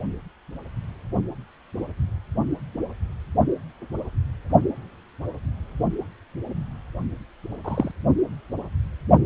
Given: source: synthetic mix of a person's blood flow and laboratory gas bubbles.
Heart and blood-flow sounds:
Doppler ultrasound of blood flow; precordium
7.64-7.92 s: bubbles
From the record:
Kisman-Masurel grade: 112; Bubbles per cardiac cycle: 1 to 2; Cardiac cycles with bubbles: 1 to 10%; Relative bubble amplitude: moderate (0.250 to 0.450); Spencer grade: 1 (occasional bubble signal discernible with the cardiac motion signal, with majority of cardiac periods free of bubbles); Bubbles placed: only in the low amplitude regions of the cardiac cycle

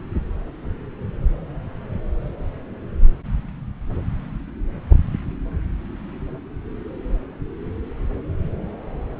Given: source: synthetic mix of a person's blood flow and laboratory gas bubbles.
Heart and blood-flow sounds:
Doppler ultrasound of blood flow; subclavian vein
no bubbles
From the record:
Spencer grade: 0 (complete lack of bubble signals)

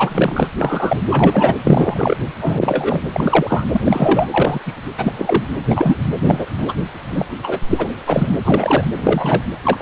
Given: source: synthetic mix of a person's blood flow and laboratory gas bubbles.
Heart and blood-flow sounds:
Doppler ultrasound of blood flow; precordium
0.00-0.48 s: bubbles
0.59-1.01 s: bubbles
1.09-1.55 s: bubbles
1.66-2.17 s: bubbles
2.41-3.04 s: bubbles
3.12-3.65 s: bubbles
3.73-3.81 s: bubbles
3.83-4.60 s: bubbles
4.66-4.73 s: bubbles
4.98-5.12 s: bubbles
5.17-5.43 s: bubbles
5.70-5.97 s: bubbles
6.27-6.46 s: bubbles
6.58-6.74 s: bubbles
7.11-7.26 s: bubbles
7.43-7.61 s: bubbles
7.70-7.89 s: bubbles
8.06-8.36 s: bubbles
8.45-8.84 s: bubbles
8.96-9.44 s: bubbles
9.63-9.82 s: bubbles
From the record:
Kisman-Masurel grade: 243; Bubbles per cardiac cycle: several, 3 to 8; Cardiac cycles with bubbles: 100%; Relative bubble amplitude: loud (0.450 to 0.775); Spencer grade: 3 (all of the cardiac periods contain showers or single bubble signals, but not dominating or overriding the cardiac motion signals); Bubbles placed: anywhere in the cardiac cycle

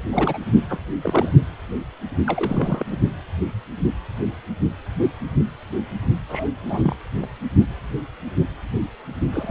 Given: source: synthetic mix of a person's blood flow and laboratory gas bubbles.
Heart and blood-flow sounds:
Doppler ultrasound of blood flow; precordium
0.04-0.07 s: bubbles
0.10-0.39 s: bubbles
0.69-0.80 s: bubbles
1.01-1.31 s: bubbles
2.27-2.86 s: bubbles
2.91-2.98 s: bubbles
6.29-6.48 s: bubbles
6.66-6.96 s: bubbles
7.21-7.26 s: bubbles
9.32-9.50 s: bubbles
From the record:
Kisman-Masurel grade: 222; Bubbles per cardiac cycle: several, 3 to 8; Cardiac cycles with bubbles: 10 to 50%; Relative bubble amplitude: moderate (0.250 to 0.450); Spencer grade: 2 (many but less than half of the cardiac periods contain bubble signals, singularly or in groups); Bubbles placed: only in the low amplitude regions of the cardiac cycle

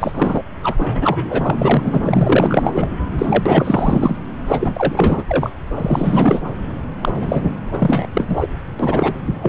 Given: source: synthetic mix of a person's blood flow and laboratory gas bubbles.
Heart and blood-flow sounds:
Doppler ultrasound of blood flow; subclavian vein
0.00-0.42 s: bubbles
0.62-2.89 s: bubbles
3.18-4.17 s: bubbles
4.46-5.23 s: bubbles
5.27-5.51 s: bubbles
5.75-6.40 s: bubbles
7.01-7.11 s: bubbles
7.15-7.54 s: bubbles
7.73-8.07 s: bubbles
8.13-8.48 s: bubbles
8.79-9.13 s: bubbles
9.42-9.49 s: bubbles
From the record:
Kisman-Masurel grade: 444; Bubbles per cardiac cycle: continuous sound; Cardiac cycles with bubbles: 100%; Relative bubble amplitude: maximal (0.775 to 0.999); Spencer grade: 4 (maximum detectable bubble signal sounding continuously throughout systole and diastole of every cardiac period, and overriding the amplitude of the normal cardiac signals); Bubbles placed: anywhere in the cardiac cycle

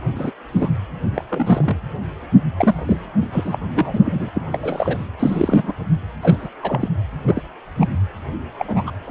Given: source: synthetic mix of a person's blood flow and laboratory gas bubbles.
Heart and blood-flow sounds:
Doppler ultrasound of blood flow; precordium
0.15-0.32 s: bubbles
0.52-0.70 s: bubbles
1.14-1.25 s: bubbles
1.29-1.80 s: bubbles
2.57-3.01 s: bubbles
3.21-3.26 s: bubbles
3.32-3.59 s: bubbles
3.74-4.29 s: bubbles
4.34-4.42 s: bubbles
4.52-4.60 s: bubbles
4.62-5.08 s: bubbles
5.19-5.74 s: bubbles
6.22-6.49 s: bubbles
6.62-6.88 s: bubbles
7.27-7.42 s: bubbles
7.80-7.87 s: bubbles
8.58-8.65 s: bubbles
8.67-8.83 s: bubbles
8.86-8.91 s: bubbles
9.04-9.11 s: bubbles
From the record:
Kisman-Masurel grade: 242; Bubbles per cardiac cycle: several, 3 to 8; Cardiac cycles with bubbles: 100%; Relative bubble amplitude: moderate (0.250 to 0.450); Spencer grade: 3 (all of the cardiac periods contain showers or single bubble signals, but not dominating or overriding the cardiac motion signals); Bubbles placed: anywhere in the cardiac cycle

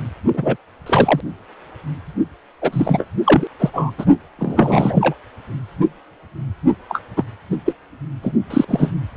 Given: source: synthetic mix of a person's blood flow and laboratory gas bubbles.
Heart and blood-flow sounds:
Doppler ultrasound of blood flow; precordium
0.33-0.57 s: bubbles
0.86-1.21 s: bubbles
2.61-3.07 s: bubbles
3.24-3.47 s: bubbles
3.59-3.70 s: bubbles
3.73-3.92 s: bubbles
3.97-4.05 s: bubbles
4.38-5.15 s: bubbles
6.88-7.00 s: bubbles
7.17-7.24 s: bubbles
7.51-7.57 s: bubbles
7.65-7.73 s: bubbles
8.22-8.35 s: bubbles
8.50-8.64 s: bubbles
8.68-8.90 s: bubbles
From the record:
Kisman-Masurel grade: 233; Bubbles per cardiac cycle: several, 3 to 8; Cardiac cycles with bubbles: 50 to 99%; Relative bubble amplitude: loud (0.450 to 0.775); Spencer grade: 3 (all of the cardiac periods contain showers or single bubble signals, but not dominating or overriding the cardiac motion signals); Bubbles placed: only in the low amplitude regions of the cardiac cycle

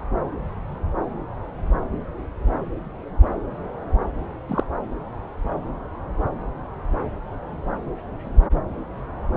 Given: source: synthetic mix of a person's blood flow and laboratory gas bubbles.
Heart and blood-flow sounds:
Doppler ultrasound of blood flow; subclavian vein
4.48-4.63 s: bubbles
From the record:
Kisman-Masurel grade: 112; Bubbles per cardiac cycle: 1 to 2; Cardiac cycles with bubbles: 1 to 10%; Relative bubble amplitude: moderate (0.250 to 0.450); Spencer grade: 1 (occasional bubble signal discernible with the cardiac motion signal, with majority of cardiac periods free of bubbles); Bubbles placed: anywhere in the cardiac cycle

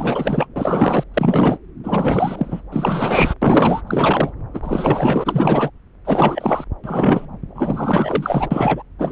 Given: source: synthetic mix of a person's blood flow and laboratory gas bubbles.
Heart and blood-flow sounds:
Doppler ultrasound of blood flow; subclavian vein
0.00-0.47 s: bubbles
0.55-1.04 s: bubbles
1.13-1.58 s: bubbles
1.83-2.61 s: bubbles
2.71-3.34 s: bubbles
3.42-3.81 s: bubbles
3.86-4.31 s: bubbles
4.53-5.70 s: bubbles
6.04-6.64 s: bubbles
6.83-7.26 s: bubbles
7.54-8.82 s: bubbles
8.98-9.12 s: bubbles
From the record:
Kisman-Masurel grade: 444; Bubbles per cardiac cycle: continuous sound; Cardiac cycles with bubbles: 100%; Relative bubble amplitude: maximal (0.775 to 0.999); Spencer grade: 4 (maximum detectable bubble signal sounding continuously throughout systole and diastole of every cardiac period, and overriding the amplitude of the normal cardiac signals); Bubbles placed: anywhere in the cardiac cycle

